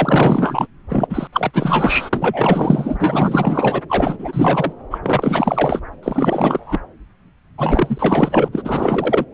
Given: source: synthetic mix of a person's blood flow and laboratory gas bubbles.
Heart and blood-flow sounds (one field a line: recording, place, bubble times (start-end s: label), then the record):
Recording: Doppler ultrasound of blood flow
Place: subclavian vein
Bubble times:
0.00-0.67 s: bubbles
0.89-1.07 s: bubbles
1.09-1.28 s: bubbles
1.32-1.51 s: bubbles
1.54-2.10 s: bubbles
2.12-3.81 s: bubbles
3.89-4.72 s: bubbles
4.90-4.98 s: bubbles
5.02-5.81 s: bubbles
6.02-6.81 s: bubbles
7.58-8.50 s: bubbles
8.52-9.25 s: bubbles
From the record:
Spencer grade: 4 (maximum detectable bubble signal sounding continuously throughout systole and diastole of every cardiac period, and overriding the amplitude of the normal cardiac signals)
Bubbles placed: anywhere in the cardiac cycle